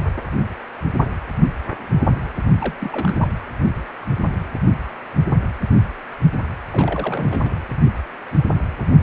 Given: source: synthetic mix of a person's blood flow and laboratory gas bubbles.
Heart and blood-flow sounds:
Doppler ultrasound of blood flow; precordium
2.46-2.56 s: bubbles
2.59-2.75 s: bubbles
2.80-3.28 s: bubbles
6.71-7.60 s: bubbles
From the record:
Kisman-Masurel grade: 221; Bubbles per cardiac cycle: several, 3 to 8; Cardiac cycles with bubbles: 10 to 50%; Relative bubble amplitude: barely perceptible (0.100 to 0.250); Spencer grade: 2 (many but less than half of the cardiac periods contain bubble signals, singularly or in groups); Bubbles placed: anywhere in the cardiac cycle

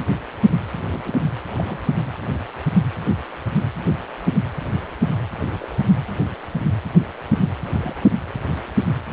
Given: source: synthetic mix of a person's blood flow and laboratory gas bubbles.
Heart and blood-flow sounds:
Doppler ultrasound of blood flow; precordium
0.92-1.19 s: bubbles
1.52-1.93 s: bubbles
5.59-5.84 s: bubbles
7.73-7.94 s: bubbles
From the record:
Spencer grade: 2 (many but less than half of the cardiac periods contain bubble signals, singularly or in groups); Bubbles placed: anywhere in the cardiac cycle

